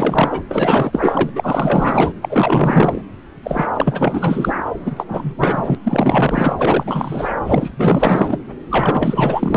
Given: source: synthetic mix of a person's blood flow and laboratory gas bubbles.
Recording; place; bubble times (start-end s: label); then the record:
Doppler ultrasound of blood flow; subclavian vein
0.00-0.41 s: bubbles
0.48-1.29 s: bubbles
1.35-2.12 s: bubbles
2.22-3.02 s: bubbles
3.43-3.67 s: bubbles
3.75-4.53 s: bubbles
4.86-5.04 s: bubbles
5.08-5.34 s: bubbles
5.38-5.75 s: bubbles
5.83-6.54 s: bubbles
6.58-7.30 s: bubbles
7.46-7.74 s: bubbles
7.77-8.38 s: bubbles
8.70-9.57 s: bubbles
From the record:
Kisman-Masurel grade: 444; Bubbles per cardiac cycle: continuous sound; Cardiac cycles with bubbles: 100%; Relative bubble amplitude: maximal (0.775 to 0.999); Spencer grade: 4 (maximum detectable bubble signal sounding continuously throughout systole and diastole of every cardiac period, and overriding the amplitude of the normal cardiac signals); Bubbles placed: anywhere in the cardiac cycle